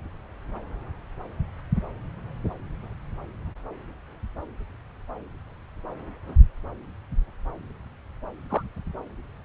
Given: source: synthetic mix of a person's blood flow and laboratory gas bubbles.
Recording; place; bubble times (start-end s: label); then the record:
Doppler ultrasound of blood flow; subclavian vein
8.49-8.63 s: bubbles
From the record:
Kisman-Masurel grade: 122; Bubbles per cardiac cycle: 1 to 2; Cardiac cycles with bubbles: 10 to 50%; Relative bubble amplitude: moderate (0.250 to 0.450); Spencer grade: 2 (many but less than half of the cardiac periods contain bubble signals, singularly or in groups); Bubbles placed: anywhere in the cardiac cycle